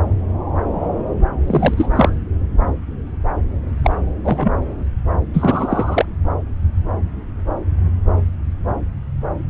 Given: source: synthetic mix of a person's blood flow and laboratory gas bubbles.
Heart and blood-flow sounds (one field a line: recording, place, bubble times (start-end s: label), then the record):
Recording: Doppler ultrasound of blood flow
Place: subclavian vein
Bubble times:
1.46-2.18 s: bubbles
3.83-3.96 s: bubbles
4.24-4.52 s: bubbles
5.33-6.05 s: bubbles
From the record:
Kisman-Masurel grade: 223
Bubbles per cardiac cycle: several, 3 to 8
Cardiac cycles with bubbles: 10 to 50%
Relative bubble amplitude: loud (0.450 to 0.775)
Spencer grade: 2 (many but less than half of the cardiac periods contain bubble signals, singularly or in groups)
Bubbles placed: anywhere in the cardiac cycle